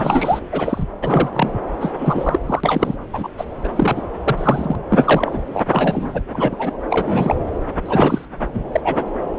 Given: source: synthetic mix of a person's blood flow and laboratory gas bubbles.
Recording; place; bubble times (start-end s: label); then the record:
Doppler ultrasound of blood flow; subclavian vein
0.00-0.40 s: bubbles
0.52-0.83 s: bubbles
1.02-1.50 s: bubbles
1.80-1.93 s: bubbles
1.98-2.39 s: bubbles
2.46-2.60 s: bubbles
2.64-2.97 s: bubbles
3.13-3.29 s: bubbles
3.38-3.45 s: bubbles
3.64-3.69 s: bubbles
3.75-4.07 s: bubbles
4.24-4.78 s: bubbles
4.89-5.42 s: bubbles
5.53-6.22 s: bubbles
6.27-6.77 s: bubbles
6.89-7.35 s: bubbles
7.85-8.25 s: bubbles
8.54-8.64 s: bubbles
8.71-8.81 s: bubbles
8.84-9.04 s: bubbles
From the record:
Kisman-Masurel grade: 243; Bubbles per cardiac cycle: several, 3 to 8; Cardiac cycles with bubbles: 100%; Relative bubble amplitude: loud (0.450 to 0.775); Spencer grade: 3 (all of the cardiac periods contain showers or single bubble signals, but not dominating or overriding the cardiac motion signals); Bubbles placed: anywhere in the cardiac cycle